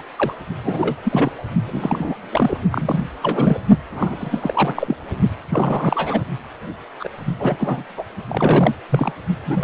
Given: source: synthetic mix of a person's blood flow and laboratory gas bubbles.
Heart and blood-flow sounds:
Doppler ultrasound of blood flow; precordium
0.00-0.03 s: bubbles
0.16-0.34 s: bubbles
0.64-0.96 s: bubbles
1.03-1.32 s: bubbles
1.67-2.16 s: bubbles
2.32-2.58 s: bubbles
2.71-3.07 s: bubbles
3.20-3.59 s: bubbles
3.90-4.96 s: bubbles
5.49-6.23 s: bubbles
7.00-7.08 s: bubbles
7.17-7.35 s: bubbles
7.38-8.04 s: bubbles
8.28-8.75 s: bubbles
8.89-9.12 s: bubbles
9.46-9.64 s: bubbles
From the record:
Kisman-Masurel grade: 332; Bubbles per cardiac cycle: rolling drumbeat, 9 or more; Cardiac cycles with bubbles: 50 to 99%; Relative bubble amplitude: moderate (0.250 to 0.450); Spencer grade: 3 (all of the cardiac periods contain showers or single bubble signals, but not dominating or overriding the cardiac motion signals); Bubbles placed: only in the low amplitude regions of the cardiac cycle

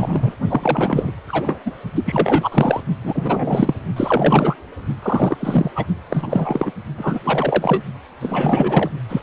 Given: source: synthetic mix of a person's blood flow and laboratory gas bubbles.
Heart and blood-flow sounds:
Doppler ultrasound of blood flow; precordium
0.00-0.34 s: bubbles
0.49-1.11 s: bubbles
1.27-1.59 s: bubbles
1.66-1.72 s: bubbles
1.95-2.49 s: bubbles
2.52-2.81 s: bubbles
3.03-3.74 s: bubbles
3.96-4.56 s: bubbles
5.02-5.71 s: bubbles
5.75-5.86 s: bubbles
6.09-6.72 s: bubbles
6.97-7.21 s: bubbles
7.24-7.83 s: bubbles
8.21-8.89 s: bubbles
9.08-9.22 s: bubbles
From the record:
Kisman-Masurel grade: 343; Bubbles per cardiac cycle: rolling drumbeat, 9 or more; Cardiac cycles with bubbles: 100%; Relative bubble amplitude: loud (0.450 to 0.775); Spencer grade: 3 (all of the cardiac periods contain showers or single bubble signals, but not dominating or overriding the cardiac motion signals); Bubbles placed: only in the low amplitude regions of the cardiac cycle

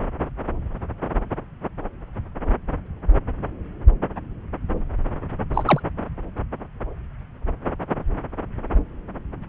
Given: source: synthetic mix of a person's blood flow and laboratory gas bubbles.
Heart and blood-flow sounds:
Doppler ultrasound of blood flow; subclavian vein
5.54-5.80 s: bubbles
From the record:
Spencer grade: 1 (occasional bubble signal discernible with the cardiac motion signal, with majority of cardiac periods free of bubbles); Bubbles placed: anywhere in the cardiac cycle

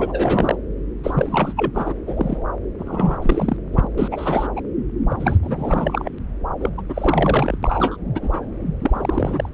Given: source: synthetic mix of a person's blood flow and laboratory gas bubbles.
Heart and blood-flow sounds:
Doppler ultrasound of blood flow; subclavian vein
0.00-0.55 s: bubbles
1.03-1.53 s: bubbles
1.56-1.71 s: bubbles
1.74-1.93 s: bubbles
2.06-2.38 s: bubbles
2.79-3.19 s: bubbles
3.22-3.56 s: bubbles
3.72-3.87 s: bubbles
3.98-4.08 s: bubbles
4.11-4.48 s: bubbles
4.56-4.61 s: bubbles
5.10-5.39 s: bubbles
5.42-6.09 s: bubbles
6.61-6.70 s: bubbles
6.78-6.82 s: bubbles
6.89-7.58 s: bubbles
7.62-7.97 s: bubbles
8.14-8.46 s: bubbles
8.81-9.49 s: bubbles
From the record:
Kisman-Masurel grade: 342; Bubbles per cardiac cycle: rolling drumbeat, 9 or more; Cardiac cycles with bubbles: 100%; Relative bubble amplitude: moderate (0.250 to 0.450); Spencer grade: 3 (all of the cardiac periods contain showers or single bubble signals, but not dominating or overriding the cardiac motion signals); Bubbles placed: anywhere in the cardiac cycle

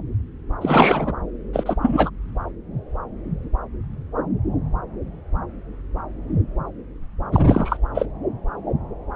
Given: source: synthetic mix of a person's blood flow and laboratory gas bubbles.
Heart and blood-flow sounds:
Doppler ultrasound of blood flow; subclavian vein
0.61-1.12 s: bubbles
1.53-1.77 s: bubbles
1.81-2.10 s: bubbles
7.32-7.42 s: bubbles
7.46-7.77 s: bubbles
7.94-8.07 s: bubbles
From the record:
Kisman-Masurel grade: 223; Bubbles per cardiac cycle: several, 3 to 8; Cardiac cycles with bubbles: 10 to 50%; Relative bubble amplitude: loud (0.450 to 0.775); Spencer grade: 2 (many but less than half of the cardiac periods contain bubble signals, singularly or in groups); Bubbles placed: anywhere in the cardiac cycle

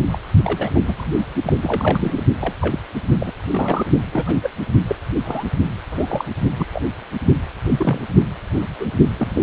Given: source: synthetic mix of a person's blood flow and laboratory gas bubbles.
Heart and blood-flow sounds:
Doppler ultrasound of blood flow; precordium
0.00-0.02 s: bubbles
0.12-0.18 s: bubbles
0.44-1.16 s: bubbles
1.45-1.53 s: bubbles
1.62-2.23 s: bubbles
2.40-2.54 s: bubbles
2.60-2.79 s: bubbles
3.20-3.33 s: bubbles
3.50-3.85 s: bubbles
4.12-4.39 s: bubbles
4.43-4.50 s: bubbles
4.87-4.96 s: bubbles
5.25-5.44 s: bubbles
5.91-6.25 s: bubbles
6.59-6.67 s: bubbles
6.72-6.82 s: bubbles
7.65-8.02 s: bubbles
8.55-8.69 s: bubbles
8.79-8.86 s: bubbles
9.18-9.27 s: bubbles
9.29-9.43 s: bubbles
From the record:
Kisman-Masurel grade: 242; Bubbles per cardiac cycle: several, 3 to 8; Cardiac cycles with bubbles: 100%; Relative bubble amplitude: moderate (0.250 to 0.450); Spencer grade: 3 (all of the cardiac periods contain showers or single bubble signals, but not dominating or overriding the cardiac motion signals); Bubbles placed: only in the low amplitude regions of the cardiac cycle

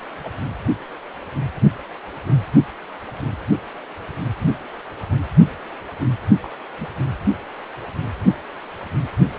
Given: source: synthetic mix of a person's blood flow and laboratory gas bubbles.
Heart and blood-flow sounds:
Doppler ultrasound of blood flow; precordium
0.24-0.31 s: bubbles
6.41-6.50 s: bubbles
6.79-6.87 s: bubbles
From the record:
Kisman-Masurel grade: 121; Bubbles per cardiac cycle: 1 to 2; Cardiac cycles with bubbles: 10 to 50%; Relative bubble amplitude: barely perceptible (0.100 to 0.250); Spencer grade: 2 (many but less than half of the cardiac periods contain bubble signals, singularly or in groups); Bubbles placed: only in the low amplitude regions of the cardiac cycle

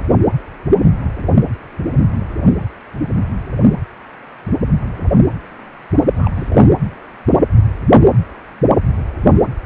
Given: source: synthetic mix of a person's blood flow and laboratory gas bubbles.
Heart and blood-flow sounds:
Doppler ultrasound of blood flow; precordium
6.16-6.31 s: bubbles
6.35-6.70 s: bubbles
From the record:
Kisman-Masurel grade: 212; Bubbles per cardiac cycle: several, 3 to 8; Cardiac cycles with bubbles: 1 to 10%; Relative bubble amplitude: moderate (0.250 to 0.450); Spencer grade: 1 (occasional bubble signal discernible with the cardiac motion signal, with majority of cardiac periods free of bubbles); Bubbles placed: anywhere in the cardiac cycle

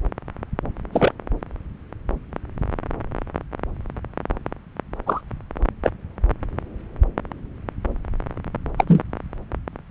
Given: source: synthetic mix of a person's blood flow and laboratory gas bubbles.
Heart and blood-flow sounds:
Doppler ultrasound of blood flow; subclavian vein
0.92-1.12 s: bubbles
5.06-5.21 s: bubbles
5.83-5.90 s: bubbles
8.78-8.85 s: bubbles
8.88-9.03 s: bubbles
From the record:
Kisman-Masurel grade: 123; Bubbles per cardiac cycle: 1 to 2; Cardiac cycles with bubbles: 10 to 50%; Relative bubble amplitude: loud (0.450 to 0.775); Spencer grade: 2 (many but less than half of the cardiac periods contain bubble signals, singularly or in groups); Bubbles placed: anywhere in the cardiac cycle

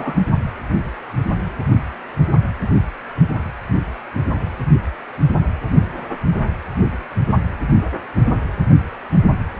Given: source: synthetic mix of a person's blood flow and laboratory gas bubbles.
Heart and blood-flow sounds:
Doppler ultrasound of blood flow; precordium
0.00-0.21 s: bubbles
From the record:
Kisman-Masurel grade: 112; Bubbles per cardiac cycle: 1 to 2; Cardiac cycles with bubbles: 1 to 10%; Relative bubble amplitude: moderate (0.250 to 0.450); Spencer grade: 1 (occasional bubble signal discernible with the cardiac motion signal, with majority of cardiac periods free of bubbles); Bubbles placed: anywhere in the cardiac cycle

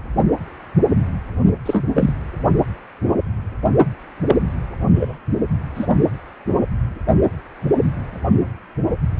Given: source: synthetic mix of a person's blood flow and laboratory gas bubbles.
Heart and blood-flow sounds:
Doppler ultrasound of blood flow; precordium
1.66-1.84 s: bubbles
1.95-2.13 s: bubbles
4.27-4.36 s: bubbles
4.95-5.18 s: bubbles
5.75-5.87 s: bubbles
From the record:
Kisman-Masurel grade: 222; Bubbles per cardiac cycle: several, 3 to 8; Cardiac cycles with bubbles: 10 to 50%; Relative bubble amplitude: moderate (0.250 to 0.450); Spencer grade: 2 (many but less than half of the cardiac periods contain bubble signals, singularly or in groups); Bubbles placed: only in the low amplitude regions of the cardiac cycle

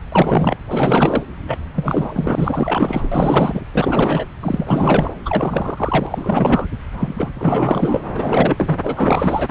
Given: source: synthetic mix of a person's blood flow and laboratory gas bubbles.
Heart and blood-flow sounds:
Doppler ultrasound of blood flow; subclavian vein
0.12-0.57 s: bubbles
0.69-1.23 s: bubbles
1.47-1.58 s: bubbles
1.75-3.08 s: bubbles
3.12-3.60 s: bubbles
3.74-4.25 s: bubbles
4.41-5.13 s: bubbles
5.25-6.07 s: bubbles
6.11-6.67 s: bubbles
7.00-7.32 s: bubbles
7.34-8.02 s: bubbles
8.15-8.79 s: bubbles
8.84-9.48 s: bubbles
From the record:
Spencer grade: 4 (maximum detectable bubble signal sounding continuously throughout systole and diastole of every cardiac period, and overriding the amplitude of the normal cardiac signals); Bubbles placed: anywhere in the cardiac cycle

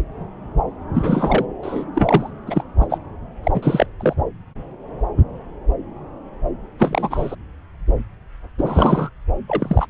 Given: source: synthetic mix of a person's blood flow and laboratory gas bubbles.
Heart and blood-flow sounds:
Doppler ultrasound of blood flow; subclavian vein
0.93-1.46 s: bubbles
1.62-1.84 s: bubbles
1.95-2.31 s: bubbles
2.46-2.63 s: bubbles
2.80-2.87 s: bubbles
2.90-2.98 s: bubbles
3.43-3.86 s: bubbles
4.00-4.14 s: bubbles
6.78-7.36 s: bubbles
8.58-9.09 s: bubbles
9.48-9.87 s: bubbles
From the record:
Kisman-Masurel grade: 233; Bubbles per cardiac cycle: several, 3 to 8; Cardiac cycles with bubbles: 50 to 99%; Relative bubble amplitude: loud (0.450 to 0.775); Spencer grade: 3 (all of the cardiac periods contain showers or single bubble signals, but not dominating or overriding the cardiac motion signals); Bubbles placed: anywhere in the cardiac cycle

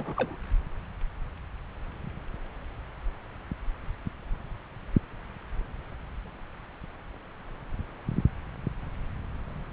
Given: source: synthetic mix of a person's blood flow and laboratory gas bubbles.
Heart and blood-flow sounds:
Doppler ultrasound of blood flow; subclavian vein
0.00-0.35 s: bubbles
From the record:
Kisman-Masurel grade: 211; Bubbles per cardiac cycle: several, 3 to 8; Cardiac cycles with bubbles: 1 to 10%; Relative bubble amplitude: barely perceptible (0.100 to 0.250); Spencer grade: 1 (occasional bubble signal discernible with the cardiac motion signal, with majority of cardiac periods free of bubbles); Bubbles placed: anywhere in the cardiac cycle

